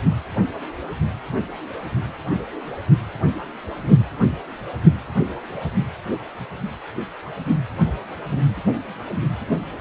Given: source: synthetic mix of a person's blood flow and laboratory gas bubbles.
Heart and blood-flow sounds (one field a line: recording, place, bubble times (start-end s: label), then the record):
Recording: Doppler ultrasound of blood flow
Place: precordium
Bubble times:
no bubbles
From the record:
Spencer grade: 0 (complete lack of bubble signals)